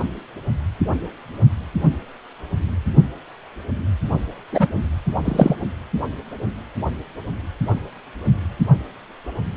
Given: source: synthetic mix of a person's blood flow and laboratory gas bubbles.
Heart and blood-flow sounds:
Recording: Doppler ultrasound of blood flow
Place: precordium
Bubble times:
4.52-4.68 s: bubbles
5.25-5.55 s: bubbles
From the record:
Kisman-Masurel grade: 213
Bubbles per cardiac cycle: several, 3 to 8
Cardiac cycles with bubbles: 1 to 10%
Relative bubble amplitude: loud (0.450 to 0.775)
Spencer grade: 1 (occasional bubble signal discernible with the cardiac motion signal, with majority of cardiac periods free of bubbles)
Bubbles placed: only in the low amplitude regions of the cardiac cycle

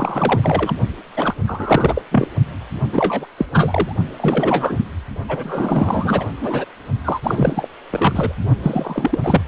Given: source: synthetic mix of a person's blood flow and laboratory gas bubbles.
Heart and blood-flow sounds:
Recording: Doppler ultrasound of blood flow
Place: precordium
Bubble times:
0.00-0.73 s: bubbles
1.17-1.34 s: bubbles
1.47-2.02 s: bubbles
2.11-2.28 s: bubbles
2.92-3.26 s: bubbles
3.38-3.46 s: bubbles
3.53-3.96 s: bubbles
4.18-4.86 s: bubbles
5.28-6.26 s: bubbles
6.40-6.65 s: bubbles
7.04-7.67 s: bubbles
7.91-8.34 s: bubbles
8.62-9.18 s: bubbles
9.23-9.41 s: bubbles
From the record:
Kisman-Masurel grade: 343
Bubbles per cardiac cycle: rolling drumbeat, 9 or more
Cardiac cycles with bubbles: 100%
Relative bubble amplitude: loud (0.450 to 0.775)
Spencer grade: 3 (all of the cardiac periods contain showers or single bubble signals, but not dominating or overriding the cardiac motion signals)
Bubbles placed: only in the low amplitude regions of the cardiac cycle

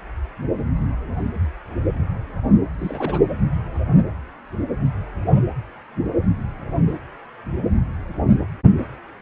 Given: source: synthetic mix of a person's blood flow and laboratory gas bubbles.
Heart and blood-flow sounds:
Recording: Doppler ultrasound of blood flow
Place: precordium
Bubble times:
2.78-3.38 s: bubbles
From the record:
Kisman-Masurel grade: 211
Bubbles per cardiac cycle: several, 3 to 8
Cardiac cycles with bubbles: 1 to 10%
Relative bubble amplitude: barely perceptible (0.100 to 0.250)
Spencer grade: 1 (occasional bubble signal discernible with the cardiac motion signal, with majority of cardiac periods free of bubbles)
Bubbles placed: anywhere in the cardiac cycle

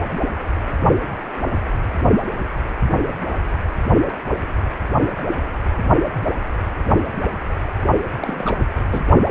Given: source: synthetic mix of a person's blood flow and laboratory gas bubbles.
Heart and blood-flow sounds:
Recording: Doppler ultrasound of blood flow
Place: precordium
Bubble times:
8.20-8.60 s: bubbles
8.91-9.01 s: bubbles
From the record:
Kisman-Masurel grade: 221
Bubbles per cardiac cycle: several, 3 to 8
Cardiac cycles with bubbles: 10 to 50%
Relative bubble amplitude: barely perceptible (0.100 to 0.250)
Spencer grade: 2 (many but less than half of the cardiac periods contain bubble signals, singularly or in groups)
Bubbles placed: only in the low amplitude regions of the cardiac cycle

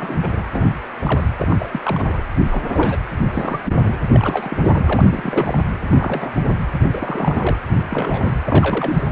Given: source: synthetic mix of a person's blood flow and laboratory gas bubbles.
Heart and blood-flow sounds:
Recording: Doppler ultrasound of blood flow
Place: precordium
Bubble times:
0.00-0.43 s: bubbles
0.53-0.72 s: bubbles
1.05-1.28 s: bubbles
1.38-1.80 s: bubbles
1.83-2.21 s: bubbles
2.52-2.63 s: bubbles
2.69-2.97 s: bubbles
3.33-3.59 s: bubbles
3.66-3.99 s: bubbles
4.12-4.57 s: bubbles
4.62-4.83 s: bubbles
4.88-5.07 s: bubbles
5.09-5.58 s: bubbles
5.83-6.34 s: bubbles
6.88-7.57 s: bubbles
7.69-8.34 s: bubbles
8.45-9.04 s: bubbles
From the record:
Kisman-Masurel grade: 242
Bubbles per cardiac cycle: several, 3 to 8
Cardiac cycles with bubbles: 100%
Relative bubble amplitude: moderate (0.250 to 0.450)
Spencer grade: 3 (all of the cardiac periods contain showers or single bubble signals, but not dominating or overriding the cardiac motion signals)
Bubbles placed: anywhere in the cardiac cycle

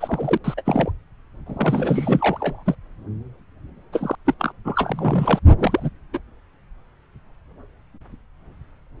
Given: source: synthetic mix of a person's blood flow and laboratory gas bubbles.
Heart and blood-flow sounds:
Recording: Doppler ultrasound of blood flow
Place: subclavian vein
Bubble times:
0.00-0.37 s: bubbles
0.44-0.54 s: bubbles
0.57-0.61 s: bubbles
0.66-0.91 s: bubbles
1.46-2.75 s: bubbles
3.92-4.15 s: bubbles
4.25-4.34 s: bubbles
4.38-4.52 s: bubbles
4.64-5.39 s: bubbles
5.58-5.90 s: bubbles
6.13-6.19 s: bubbles
From the record:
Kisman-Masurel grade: 232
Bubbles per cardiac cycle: several, 3 to 8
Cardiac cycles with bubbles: 50 to 99%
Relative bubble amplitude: moderate (0.250 to 0.450)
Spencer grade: 3 (all of the cardiac periods contain showers or single bubble signals, but not dominating or overriding the cardiac motion signals)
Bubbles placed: anywhere in the cardiac cycle

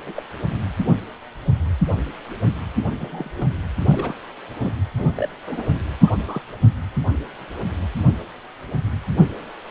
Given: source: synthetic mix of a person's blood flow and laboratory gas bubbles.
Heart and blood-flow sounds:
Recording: Doppler ultrasound of blood flow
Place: precordium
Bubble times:
0.05-0.23 s: bubbles
2.77-2.94 s: bubbles
2.98-3.55 s: bubbles
3.85-4.14 s: bubbles
4.60-4.73 s: bubbles
4.95-5.13 s: bubbles
5.17-5.29 s: bubbles
5.43-5.77 s: bubbles
6.00-6.11 s: bubbles
6.27-6.42 s: bubbles
From the record:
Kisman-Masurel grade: 221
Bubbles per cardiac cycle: several, 3 to 8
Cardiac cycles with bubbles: 10 to 50%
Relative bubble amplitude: barely perceptible (0.100 to 0.250)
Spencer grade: 2 (many but less than half of the cardiac periods contain bubble signals, singularly or in groups)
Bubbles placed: anywhere in the cardiac cycle

